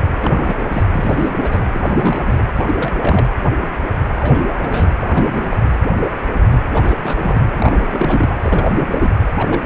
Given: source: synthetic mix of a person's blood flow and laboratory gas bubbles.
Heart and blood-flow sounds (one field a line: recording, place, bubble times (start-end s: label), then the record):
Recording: Doppler ultrasound of blood flow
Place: precordium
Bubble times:
0.20-0.83 s: bubbles
0.94-1.30 s: bubbles
1.42-1.67 s: bubbles
1.72-2.43 s: bubbles
2.56-2.76 s: bubbles
2.78-2.92 s: bubbles
2.98-3.26 s: bubbles
4.17-4.89 s: bubbles
5.00-5.57 s: bubbles
6.68-6.97 s: bubbles
7.03-7.45 s: bubbles
7.56-8.37 s: bubbles
8.44-9.11 s: bubbles
9.34-9.62 s: bubbles
From the record:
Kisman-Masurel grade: 332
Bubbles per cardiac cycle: rolling drumbeat, 9 or more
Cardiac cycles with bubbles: 50 to 99%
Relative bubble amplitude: moderate (0.250 to 0.450)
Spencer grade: 3 (all of the cardiac periods contain showers or single bubble signals, but not dominating or overriding the cardiac motion signals)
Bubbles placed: anywhere in the cardiac cycle